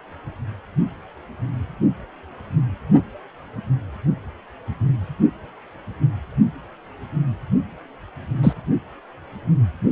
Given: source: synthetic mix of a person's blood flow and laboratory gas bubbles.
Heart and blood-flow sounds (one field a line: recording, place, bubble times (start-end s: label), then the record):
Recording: Doppler ultrasound of blood flow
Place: precordium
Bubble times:
8.43-8.53 s: bubbles
From the record:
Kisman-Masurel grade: 123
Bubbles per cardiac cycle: 1 to 2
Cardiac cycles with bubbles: 10 to 50%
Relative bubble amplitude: loud (0.450 to 0.775)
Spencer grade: 2 (many but less than half of the cardiac periods contain bubble signals, singularly or in groups)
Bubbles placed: only in the low amplitude regions of the cardiac cycle